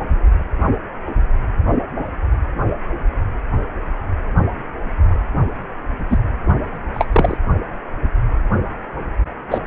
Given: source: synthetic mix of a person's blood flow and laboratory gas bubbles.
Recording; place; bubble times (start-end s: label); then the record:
Doppler ultrasound of blood flow; precordium
6.10-6.18 s: bubbles
6.94-7.07 s: bubbles
7.12-7.38 s: bubbles
9.50-9.58 s: bubbles
From the record:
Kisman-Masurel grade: 123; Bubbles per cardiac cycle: 1 to 2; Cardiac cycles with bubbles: 10 to 50%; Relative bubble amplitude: loud (0.450 to 0.775); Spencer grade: 2 (many but less than half of the cardiac periods contain bubble signals, singularly or in groups); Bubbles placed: only in the low amplitude regions of the cardiac cycle